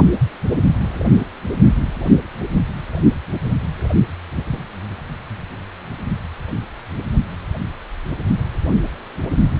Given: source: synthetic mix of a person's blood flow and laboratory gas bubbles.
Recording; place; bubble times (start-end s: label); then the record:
Doppler ultrasound of blood flow; precordium
no bubbles
From the record:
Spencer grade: 0 (complete lack of bubble signals)